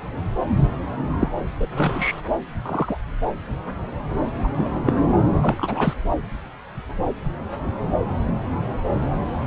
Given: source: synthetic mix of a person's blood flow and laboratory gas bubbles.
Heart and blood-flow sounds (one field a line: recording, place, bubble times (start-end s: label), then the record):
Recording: Doppler ultrasound of blood flow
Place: subclavian vein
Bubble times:
1.19-1.28 s: bubbles
1.60-1.68 s: bubbles
1.75-2.21 s: bubbles
2.66-2.98 s: bubbles
4.43-4.48 s: bubbles
4.57-4.72 s: bubbles
4.86-4.93 s: bubbles
4.98-5.08 s: bubbles
5.36-5.93 s: bubbles
From the record:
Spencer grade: 2 (many but less than half of the cardiac periods contain bubble signals, singularly or in groups)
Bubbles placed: anywhere in the cardiac cycle